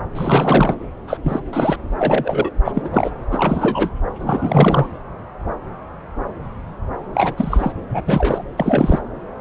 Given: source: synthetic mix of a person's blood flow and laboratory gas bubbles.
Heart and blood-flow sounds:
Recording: Doppler ultrasound of blood flow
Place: subclavian vein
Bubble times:
0.15-0.75 s: bubbles
1.07-1.18 s: bubbles
1.24-1.40 s: bubbles
1.53-1.77 s: bubbles
1.92-2.51 s: bubbles
2.65-2.89 s: bubbles
2.92-3.10 s: bubbles
3.31-3.90 s: bubbles
4.20-4.87 s: bubbles
7.13-7.72 s: bubbles
7.89-8.01 s: bubbles
8.06-8.44 s: bubbles
8.57-8.99 s: bubbles
From the record:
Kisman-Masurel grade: 333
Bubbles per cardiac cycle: rolling drumbeat, 9 or more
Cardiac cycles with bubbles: 50 to 99%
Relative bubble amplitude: loud (0.450 to 0.775)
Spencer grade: 3 (all of the cardiac periods contain showers or single bubble signals, but not dominating or overriding the cardiac motion signals)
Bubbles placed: anywhere in the cardiac cycle

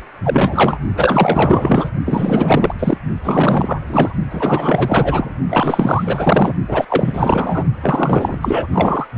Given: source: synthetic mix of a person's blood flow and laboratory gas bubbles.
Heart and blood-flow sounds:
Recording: Doppler ultrasound of blood flow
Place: precordium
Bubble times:
0.00-0.03 s: bubbles
0.23-0.78 s: bubbles
0.96-1.90 s: bubbles
2.05-2.73 s: bubbles
2.79-2.98 s: bubbles
3.23-3.81 s: bubbles
3.86-4.13 s: bubbles
4.31-5.32 s: bubbles
5.49-6.54 s: bubbles
6.68-6.85 s: bubbles
6.89-7.65 s: bubbles
7.83-8.38 s: bubbles
8.42-8.67 s: bubbles
8.72-9.08 s: bubbles
From the record:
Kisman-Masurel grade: 444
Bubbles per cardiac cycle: continuous sound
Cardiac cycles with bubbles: 100%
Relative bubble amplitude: maximal (0.775 to 0.999)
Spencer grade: 4 (maximum detectable bubble signal sounding continuously throughout systole and diastole of every cardiac period, and overriding the amplitude of the normal cardiac signals)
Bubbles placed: only in the low amplitude regions of the cardiac cycle

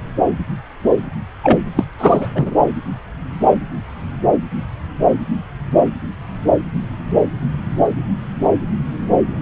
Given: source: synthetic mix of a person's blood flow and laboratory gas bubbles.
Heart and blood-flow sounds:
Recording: Doppler ultrasound of blood flow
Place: subclavian vein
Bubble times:
1.43-1.58 s: bubbles
1.75-1.84 s: bubbles
1.98-2.28 s: bubbles
2.35-2.55 s: bubbles
From the record:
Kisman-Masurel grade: 213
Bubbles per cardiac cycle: several, 3 to 8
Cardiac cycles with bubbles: 1 to 10%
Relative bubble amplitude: loud (0.450 to 0.775)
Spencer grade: 1 (occasional bubble signal discernible with the cardiac motion signal, with majority of cardiac periods free of bubbles)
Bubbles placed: anywhere in the cardiac cycle

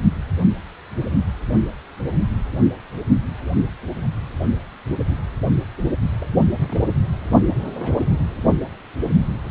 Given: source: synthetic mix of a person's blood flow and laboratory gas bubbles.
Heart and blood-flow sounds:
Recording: Doppler ultrasound of blood flow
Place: precordium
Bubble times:
6.20-6.26 s: bubbles
6.56-6.88 s: bubbles
7.79-7.96 s: bubbles
From the record:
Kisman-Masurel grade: 121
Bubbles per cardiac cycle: 1 to 2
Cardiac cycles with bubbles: 10 to 50%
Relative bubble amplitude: barely perceptible (0.100 to 0.250)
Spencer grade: 2 (many but less than half of the cardiac periods contain bubble signals, singularly or in groups)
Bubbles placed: only in the low amplitude regions of the cardiac cycle

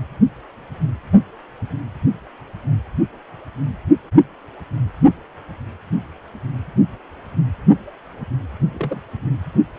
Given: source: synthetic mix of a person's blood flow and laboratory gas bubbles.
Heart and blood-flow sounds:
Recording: Doppler ultrasound of blood flow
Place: precordium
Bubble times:
8.74-9.01 s: bubbles
From the record:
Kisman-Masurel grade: 111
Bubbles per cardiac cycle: 1 to 2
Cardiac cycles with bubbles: 1 to 10%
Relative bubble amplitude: barely perceptible (0.100 to 0.250)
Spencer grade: 1 (occasional bubble signal discernible with the cardiac motion signal, with majority of cardiac periods free of bubbles)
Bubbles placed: only in the low amplitude regions of the cardiac cycle

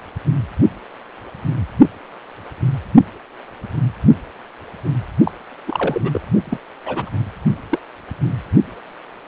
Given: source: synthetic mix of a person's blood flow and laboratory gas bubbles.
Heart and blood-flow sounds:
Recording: Doppler ultrasound of blood flow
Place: precordium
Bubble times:
5.25-5.31 s: bubbles
5.67-6.21 s: bubbles
6.45-6.58 s: bubbles
6.86-7.10 s: bubbles
7.70-7.79 s: bubbles
From the record:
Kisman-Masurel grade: 222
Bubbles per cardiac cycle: several, 3 to 8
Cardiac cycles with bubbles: 10 to 50%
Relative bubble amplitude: moderate (0.250 to 0.450)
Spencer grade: 2 (many but less than half of the cardiac periods contain bubble signals, singularly or in groups)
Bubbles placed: only in the low amplitude regions of the cardiac cycle

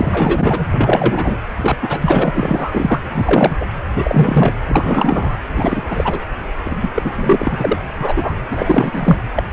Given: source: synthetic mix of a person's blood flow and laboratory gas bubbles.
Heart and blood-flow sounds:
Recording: Doppler ultrasound of blood flow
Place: precordium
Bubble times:
0.00-0.67 s: bubbles
0.72-1.38 s: bubbles
1.56-1.76 s: bubbles
1.82-3.00 s: bubbles
3.12-3.56 s: bubbles
3.60-3.65 s: bubbles
3.96-4.53 s: bubbles
4.69-5.37 s: bubbles
5.56-5.83 s: bubbles
5.90-6.20 s: bubbles
6.64-6.88 s: bubbles
6.94-7.12 s: bubbles
7.15-7.78 s: bubbles
8.01-8.33 s: bubbles
8.51-9.17 s: bubbles
9.35-9.43 s: bubbles
From the record:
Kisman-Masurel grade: 343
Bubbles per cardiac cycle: rolling drumbeat, 9 or more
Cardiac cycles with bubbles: 100%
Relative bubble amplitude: loud (0.450 to 0.775)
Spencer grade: 3 (all of the cardiac periods contain showers or single bubble signals, but not dominating or overriding the cardiac motion signals)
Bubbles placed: anywhere in the cardiac cycle

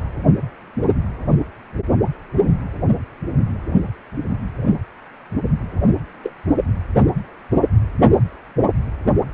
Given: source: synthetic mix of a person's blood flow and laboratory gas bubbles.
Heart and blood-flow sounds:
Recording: Doppler ultrasound of blood flow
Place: precordium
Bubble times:
6.23-6.32 s: bubbles
From the record:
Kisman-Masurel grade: 112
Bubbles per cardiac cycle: 1 to 2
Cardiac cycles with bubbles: 1 to 10%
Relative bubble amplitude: moderate (0.250 to 0.450)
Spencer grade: 1 (occasional bubble signal discernible with the cardiac motion signal, with majority of cardiac periods free of bubbles)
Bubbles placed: only in the low amplitude regions of the cardiac cycle

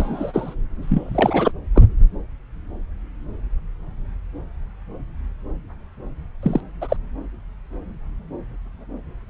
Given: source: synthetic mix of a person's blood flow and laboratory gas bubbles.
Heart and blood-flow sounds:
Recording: Doppler ultrasound of blood flow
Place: subclavian vein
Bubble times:
0.00-0.55 s: bubbles
0.82-1.52 s: bubbles
1.75-1.83 s: bubbles
6.42-6.61 s: bubbles
6.81-6.96 s: bubbles
From the record:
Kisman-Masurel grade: 223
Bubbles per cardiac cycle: several, 3 to 8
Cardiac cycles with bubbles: 10 to 50%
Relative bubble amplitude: loud (0.450 to 0.775)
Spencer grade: 2 (many but less than half of the cardiac periods contain bubble signals, singularly or in groups)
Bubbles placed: anywhere in the cardiac cycle

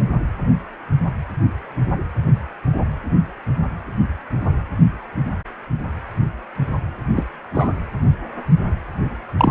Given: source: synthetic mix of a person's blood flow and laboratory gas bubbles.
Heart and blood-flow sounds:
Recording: Doppler ultrasound of blood flow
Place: precordium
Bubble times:
7.16-7.24 s: bubbles
7.54-7.73 s: bubbles
9.38-9.51 s: bubbles
From the record:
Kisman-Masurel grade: 123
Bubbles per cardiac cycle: 1 to 2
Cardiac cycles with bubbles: 10 to 50%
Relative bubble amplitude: loud (0.450 to 0.775)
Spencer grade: 2 (many but less than half of the cardiac periods contain bubble signals, singularly or in groups)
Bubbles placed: anywhere in the cardiac cycle

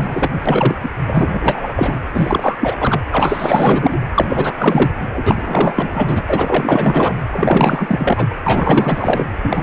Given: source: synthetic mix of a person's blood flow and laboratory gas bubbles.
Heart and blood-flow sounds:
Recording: Doppler ultrasound of blood flow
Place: precordium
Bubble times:
0.00-0.29 s: bubbles
0.46-0.75 s: bubbles
0.83-0.89 s: bubbles
1.07-1.98 s: bubbles
2.14-2.55 s: bubbles
2.60-2.76 s: bubbles
2.80-3.00 s: bubbles
3.09-3.99 s: bubbles
4.14-4.54 s: bubbles
4.58-5.08 s: bubbles
5.14-6.22 s: bubbles
6.28-7.16 s: bubbles
7.32-8.29 s: bubbles
8.44-9.25 s: bubbles
9.43-9.63 s: bubbles
From the record:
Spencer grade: 4 (maximum detectable bubble signal sounding continuously throughout systole and diastole of every cardiac period, and overriding the amplitude of the normal cardiac signals)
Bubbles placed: anywhere in the cardiac cycle

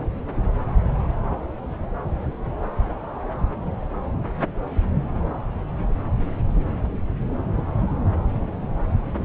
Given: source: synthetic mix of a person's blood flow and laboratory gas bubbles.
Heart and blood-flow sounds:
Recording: Doppler ultrasound of blood flow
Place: subclavian vein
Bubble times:
no bubbles
From the record:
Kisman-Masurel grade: 000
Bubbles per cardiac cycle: 0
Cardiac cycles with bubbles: 0%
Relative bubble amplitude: no bubbles discernible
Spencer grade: 0 (complete lack of bubble signals)

